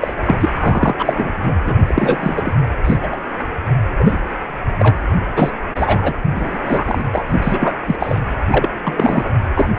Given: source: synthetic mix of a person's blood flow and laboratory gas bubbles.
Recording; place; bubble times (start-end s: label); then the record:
Doppler ultrasound of blood flow; precordium
0.00-0.16 s: bubbles
0.25-0.50 s: bubbles
0.60-0.95 s: bubbles
0.98-1.32 s: bubbles
1.42-1.56 s: bubbles
1.65-1.77 s: bubbles
1.87-2.58 s: bubbles
2.84-2.96 s: bubbles
3.02-3.08 s: bubbles
3.12-3.17 s: bubbles
3.99-4.19 s: bubbles
4.79-4.95 s: bubbles
5.36-5.50 s: bubbles
5.75-6.21 s: bubbles
6.36-6.59 s: bubbles
6.64-7.05 s: bubbles
7.12-7.25 s: bubbles
7.29-7.75 s: bubbles
7.87-7.96 s: bubbles
7.99-8.20 s: bubbles
8.52-8.68 s: bubbles
8.85-9.31 s: bubbles
9.55-9.71 s: bubbles
From the record:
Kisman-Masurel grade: 243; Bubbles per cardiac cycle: several, 3 to 8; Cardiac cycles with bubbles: 100%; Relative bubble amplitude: loud (0.450 to 0.775); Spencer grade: 3 (all of the cardiac periods contain showers or single bubble signals, but not dominating or overriding the cardiac motion signals); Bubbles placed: anywhere in the cardiac cycle